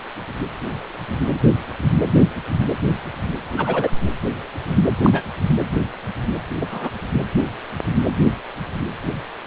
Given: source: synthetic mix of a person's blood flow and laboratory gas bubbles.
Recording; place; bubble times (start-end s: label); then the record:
Doppler ultrasound of blood flow; precordium
3.56-3.92 s: bubbles
5.03-5.23 s: bubbles
6.61-6.65 s: bubbles
6.71-6.90 s: bubbles
From the record:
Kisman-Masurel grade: 122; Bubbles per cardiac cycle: 1 to 2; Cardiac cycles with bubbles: 10 to 50%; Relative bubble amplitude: moderate (0.250 to 0.450); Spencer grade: 2 (many but less than half of the cardiac periods contain bubble signals, singularly or in groups); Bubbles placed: anywhere in the cardiac cycle